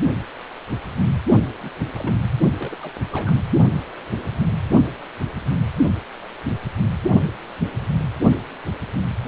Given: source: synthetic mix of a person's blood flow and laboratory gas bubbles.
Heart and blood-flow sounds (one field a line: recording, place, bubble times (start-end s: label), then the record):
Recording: Doppler ultrasound of blood flow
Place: precordium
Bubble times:
1.63-1.70 s: bubbles
1.95-2.14 s: bubbles
2.58-2.75 s: bubbles
2.80-2.91 s: bubbles
3.09-3.38 s: bubbles
From the record:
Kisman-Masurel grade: 221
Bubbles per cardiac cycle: several, 3 to 8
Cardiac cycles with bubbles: 10 to 50%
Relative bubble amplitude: barely perceptible (0.100 to 0.250)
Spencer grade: 2 (many but less than half of the cardiac periods contain bubble signals, singularly or in groups)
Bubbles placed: only in the low amplitude regions of the cardiac cycle